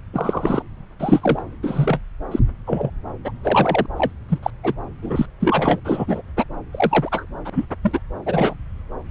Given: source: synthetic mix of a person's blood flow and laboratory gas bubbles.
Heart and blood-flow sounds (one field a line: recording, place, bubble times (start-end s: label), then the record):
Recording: Doppler ultrasound of blood flow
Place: subclavian vein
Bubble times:
0.13-0.62 s: bubbles
1.00-1.43 s: bubbles
1.63-2.00 s: bubbles
2.31-2.40 s: bubbles
2.66-2.90 s: bubbles
3.25-3.33 s: bubbles
3.43-3.87 s: bubbles
3.96-4.12 s: bubbles
4.29-4.39 s: bubbles
4.42-4.50 s: bubbles
4.63-4.74 s: bubbles
5.02-5.26 s: bubbles
5.40-5.80 s: bubbles
5.85-6.21 s: bubbles
6.37-6.44 s: bubbles
6.73-7.25 s: bubbles
7.45-7.50 s: bubbles
7.55-7.66 s: bubbles
7.83-8.00 s: bubbles
8.25-8.55 s: bubbles
From the record:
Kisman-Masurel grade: 243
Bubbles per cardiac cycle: several, 3 to 8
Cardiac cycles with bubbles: 100%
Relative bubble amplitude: loud (0.450 to 0.775)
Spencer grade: 3 (all of the cardiac periods contain showers or single bubble signals, but not dominating or overriding the cardiac motion signals)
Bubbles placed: anywhere in the cardiac cycle